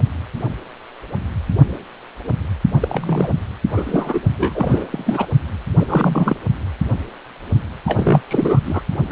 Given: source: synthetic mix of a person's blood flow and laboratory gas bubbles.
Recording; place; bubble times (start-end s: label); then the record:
Doppler ultrasound of blood flow; precordium
2.80-3.33 s: bubbles
3.69-4.22 s: bubbles
4.38-4.87 s: bubbles
4.92-5.28 s: bubbles
5.79-6.36 s: bubbles
7.85-8.20 s: bubbles
8.27-8.60 s: bubbles
8.65-8.82 s: bubbles
9.08-9.12 s: bubbles
From the record:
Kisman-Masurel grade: 332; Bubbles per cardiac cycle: rolling drumbeat, 9 or more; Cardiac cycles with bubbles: 50 to 99%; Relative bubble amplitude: moderate (0.250 to 0.450); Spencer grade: 3 (all of the cardiac periods contain showers or single bubble signals, but not dominating or overriding the cardiac motion signals); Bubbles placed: only in the low amplitude regions of the cardiac cycle